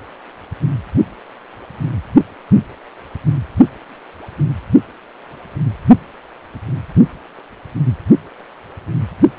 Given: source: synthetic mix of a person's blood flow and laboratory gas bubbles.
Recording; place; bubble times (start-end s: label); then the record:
Doppler ultrasound of blood flow; precordium
no bubbles
From the record:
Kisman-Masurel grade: 000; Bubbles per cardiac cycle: 0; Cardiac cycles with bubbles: 0%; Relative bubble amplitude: no bubbles discernible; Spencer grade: 0 (complete lack of bubble signals)